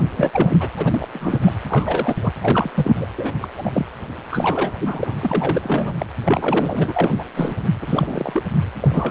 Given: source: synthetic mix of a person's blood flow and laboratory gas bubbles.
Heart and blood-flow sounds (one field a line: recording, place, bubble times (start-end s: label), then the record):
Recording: Doppler ultrasound of blood flow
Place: precordium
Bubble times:
0.16-0.69 s: bubbles
0.78-1.07 s: bubbles
1.13-1.40 s: bubbles
1.44-1.51 s: bubbles
1.67-2.15 s: bubbles
2.21-2.32 s: bubbles
2.42-2.70 s: bubbles
2.74-3.06 s: bubbles
3.17-3.32 s: bubbles
3.42-3.48 s: bubbles
3.57-3.86 s: bubbles
4.31-4.73 s: bubbles
4.76-5.15 s: bubbles
5.20-6.06 s: bubbles
6.26-7.14 s: bubbles
7.17-7.24 s: bubbles
7.36-7.56 s: bubbles
7.60-7.69 s: bubbles
7.81-8.43 s: bubbles
8.58-8.66 s: bubbles
8.80-9.11 s: bubbles
From the record:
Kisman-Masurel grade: 342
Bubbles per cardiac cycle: rolling drumbeat, 9 or more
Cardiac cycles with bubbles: 100%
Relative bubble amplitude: moderate (0.250 to 0.450)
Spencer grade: 3 (all of the cardiac periods contain showers or single bubble signals, but not dominating or overriding the cardiac motion signals)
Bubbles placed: anywhere in the cardiac cycle